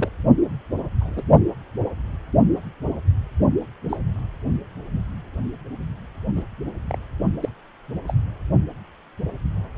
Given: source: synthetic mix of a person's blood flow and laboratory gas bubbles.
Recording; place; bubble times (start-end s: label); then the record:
Doppler ultrasound of blood flow; precordium
0.00-0.10 s: bubbles
0.99-1.23 s: bubbles
3.89-3.97 s: bubbles
6.35-6.43 s: bubbles
6.88-6.97 s: bubbles
7.41-7.49 s: bubbles
8.06-8.14 s: bubbles
From the record:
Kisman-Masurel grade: 121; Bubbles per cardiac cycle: 1 to 2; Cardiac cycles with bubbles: 10 to 50%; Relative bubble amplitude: barely perceptible (0.100 to 0.250); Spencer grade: 2 (many but less than half of the cardiac periods contain bubble signals, singularly or in groups); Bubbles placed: only in the low amplitude regions of the cardiac cycle